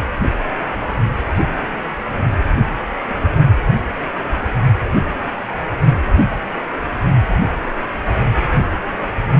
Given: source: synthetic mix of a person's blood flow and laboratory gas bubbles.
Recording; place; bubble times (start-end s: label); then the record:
Doppler ultrasound of blood flow; precordium
2.12-2.17 s: bubbles
2.56-2.78 s: bubbles
3.08-3.21 s: bubbles
From the record:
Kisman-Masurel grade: 211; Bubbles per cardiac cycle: several, 3 to 8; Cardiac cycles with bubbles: 1 to 10%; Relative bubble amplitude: barely perceptible (0.100 to 0.250); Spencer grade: 1 (occasional bubble signal discernible with the cardiac motion signal, with majority of cardiac periods free of bubbles); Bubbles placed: only in the low amplitude regions of the cardiac cycle